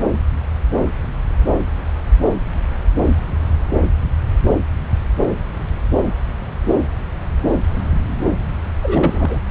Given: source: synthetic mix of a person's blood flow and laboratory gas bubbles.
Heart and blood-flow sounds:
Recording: Doppler ultrasound of blood flow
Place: subclavian vein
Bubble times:
8.83-9.42 s: bubbles
From the record:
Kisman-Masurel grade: 212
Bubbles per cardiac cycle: several, 3 to 8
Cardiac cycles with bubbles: 1 to 10%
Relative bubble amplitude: moderate (0.250 to 0.450)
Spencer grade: 1 (occasional bubble signal discernible with the cardiac motion signal, with majority of cardiac periods free of bubbles)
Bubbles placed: anywhere in the cardiac cycle

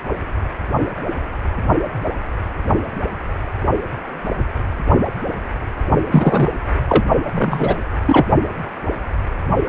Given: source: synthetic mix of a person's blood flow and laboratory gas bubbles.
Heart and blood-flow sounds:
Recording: Doppler ultrasound of blood flow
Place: precordium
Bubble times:
6.12-6.50 s: bubbles
6.88-7.04 s: bubbles
7.27-7.76 s: bubbles
8.05-8.27 s: bubbles
From the record:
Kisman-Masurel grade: 223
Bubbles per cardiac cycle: several, 3 to 8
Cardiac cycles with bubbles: 10 to 50%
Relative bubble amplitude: loud (0.450 to 0.775)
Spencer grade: 2 (many but less than half of the cardiac periods contain bubble signals, singularly or in groups)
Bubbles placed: only in the low amplitude regions of the cardiac cycle

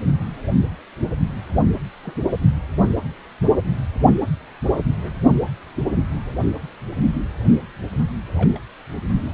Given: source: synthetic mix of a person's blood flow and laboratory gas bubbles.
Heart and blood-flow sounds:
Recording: Doppler ultrasound of blood flow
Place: precordium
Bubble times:
0.17-0.23 s: bubbles
2.03-2.21 s: bubbles
4.74-4.83 s: bubbles
4.95-5.13 s: bubbles
8.36-8.60 s: bubbles
From the record:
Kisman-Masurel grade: 121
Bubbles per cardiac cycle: 1 to 2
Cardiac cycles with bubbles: 10 to 50%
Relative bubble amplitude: barely perceptible (0.100 to 0.250)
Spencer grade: 2 (many but less than half of the cardiac periods contain bubble signals, singularly or in groups)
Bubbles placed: anywhere in the cardiac cycle

